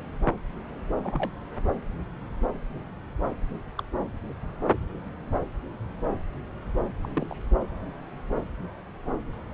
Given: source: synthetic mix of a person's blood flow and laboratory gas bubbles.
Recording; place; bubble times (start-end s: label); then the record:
Doppler ultrasound of blood flow; subclavian vein
1.03-1.31 s: bubbles
3.77-3.83 s: bubbles
7.02-7.36 s: bubbles
From the record:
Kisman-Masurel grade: 122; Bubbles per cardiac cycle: 1 to 2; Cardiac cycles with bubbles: 10 to 50%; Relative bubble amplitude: moderate (0.250 to 0.450); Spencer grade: 2 (many but less than half of the cardiac periods contain bubble signals, singularly or in groups); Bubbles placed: anywhere in the cardiac cycle